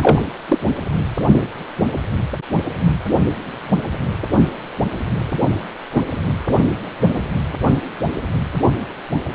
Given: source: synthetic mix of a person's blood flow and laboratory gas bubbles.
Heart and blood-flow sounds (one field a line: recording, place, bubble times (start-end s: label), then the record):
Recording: Doppler ultrasound of blood flow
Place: precordium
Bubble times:
0.01-0.22 s: bubbles
0.48-0.58 s: bubbles
5.95-6.01 s: bubbles
From the record:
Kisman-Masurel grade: 123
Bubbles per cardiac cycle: 1 to 2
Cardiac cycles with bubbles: 10 to 50%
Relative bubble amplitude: loud (0.450 to 0.775)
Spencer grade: 2 (many but less than half of the cardiac periods contain bubble signals, singularly or in groups)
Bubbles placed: anywhere in the cardiac cycle